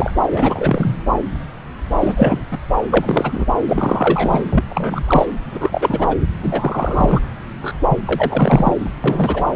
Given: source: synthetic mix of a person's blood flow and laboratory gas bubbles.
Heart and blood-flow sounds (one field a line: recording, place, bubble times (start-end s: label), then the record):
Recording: Doppler ultrasound of blood flow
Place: subclavian vein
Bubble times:
0.00-0.14 s: bubbles
0.31-0.98 s: bubbles
2.00-2.42 s: bubbles
2.51-2.59 s: bubbles
2.91-3.46 s: bubbles
3.68-4.63 s: bubbles
4.69-5.03 s: bubbles
5.07-5.26 s: bubbles
5.51-6.16 s: bubbles
6.42-7.21 s: bubbles
7.62-7.73 s: bubbles
7.88-7.98 s: bubbles
8.05-8.75 s: bubbles
8.84-8.90 s: bubbles
9.04-9.44 s: bubbles
From the record:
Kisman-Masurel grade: 333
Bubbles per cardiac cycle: rolling drumbeat, 9 or more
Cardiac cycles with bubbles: 50 to 99%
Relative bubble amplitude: loud (0.450 to 0.775)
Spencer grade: 3 (all of the cardiac periods contain showers or single bubble signals, but not dominating or overriding the cardiac motion signals)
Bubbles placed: anywhere in the cardiac cycle